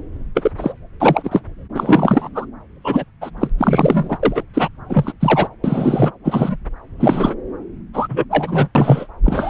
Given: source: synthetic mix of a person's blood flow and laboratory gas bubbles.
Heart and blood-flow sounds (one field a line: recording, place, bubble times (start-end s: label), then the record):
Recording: Doppler ultrasound of blood flow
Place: subclavian vein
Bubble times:
0.34-0.52 s: bubbles
0.57-0.73 s: bubbles
1.00-1.41 s: bubbles
1.75-2.28 s: bubbles
2.34-2.46 s: bubbles
2.84-3.04 s: bubbles
3.21-3.30 s: bubbles
3.37-3.49 s: bubbles
3.58-4.18 s: bubbles
4.23-4.43 s: bubbles
4.54-4.69 s: bubbles
4.90-5.12 s: bubbles
5.20-5.48 s: bubbles
5.64-6.12 s: bubbles
6.24-6.57 s: bubbles
6.99-7.34 s: bubbles
7.93-8.24 s: bubbles
8.30-8.68 s: bubbles
8.75-9.07 s: bubbles
9.24-9.49 s: bubbles
From the record:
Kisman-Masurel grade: 243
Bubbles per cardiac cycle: several, 3 to 8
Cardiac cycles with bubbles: 100%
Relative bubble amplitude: loud (0.450 to 0.775)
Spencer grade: 3 (all of the cardiac periods contain showers or single bubble signals, but not dominating or overriding the cardiac motion signals)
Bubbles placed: anywhere in the cardiac cycle